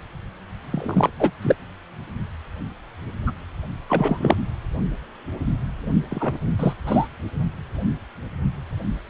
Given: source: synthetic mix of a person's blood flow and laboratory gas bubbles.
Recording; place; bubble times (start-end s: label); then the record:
Doppler ultrasound of blood flow; precordium
0.71-1.10 s: bubbles
1.20-1.31 s: bubbles
1.41-1.56 s: bubbles
3.26-3.31 s: bubbles
3.89-4.37 s: bubbles
6.11-6.38 s: bubbles
6.59-6.74 s: bubbles
6.86-7.08 s: bubbles
From the record:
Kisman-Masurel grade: 232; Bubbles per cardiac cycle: several, 3 to 8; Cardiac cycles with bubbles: 50 to 99%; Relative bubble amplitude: moderate (0.250 to 0.450); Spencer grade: 3 (all of the cardiac periods contain showers or single bubble signals, but not dominating or overriding the cardiac motion signals); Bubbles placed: only in the low amplitude regions of the cardiac cycle